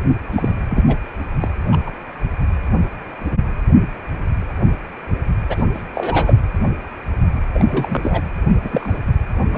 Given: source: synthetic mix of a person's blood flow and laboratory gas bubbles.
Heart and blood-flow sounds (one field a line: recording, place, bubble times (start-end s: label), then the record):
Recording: Doppler ultrasound of blood flow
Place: precordium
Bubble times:
0.29-0.56 s: bubbles
0.69-0.83 s: bubbles
0.87-0.97 s: bubbles
1.41-1.48 s: bubbles
1.71-1.77 s: bubbles
1.86-1.92 s: bubbles
5.48-5.63 s: bubbles
5.74-5.82 s: bubbles
5.94-6.36 s: bubbles
7.54-8.24 s: bubbles
8.63-8.99 s: bubbles
9.51-9.58 s: bubbles
From the record:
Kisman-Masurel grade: 232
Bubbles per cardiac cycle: several, 3 to 8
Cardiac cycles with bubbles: 50 to 99%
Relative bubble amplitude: moderate (0.250 to 0.450)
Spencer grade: 3 (all of the cardiac periods contain showers or single bubble signals, but not dominating or overriding the cardiac motion signals)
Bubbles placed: anywhere in the cardiac cycle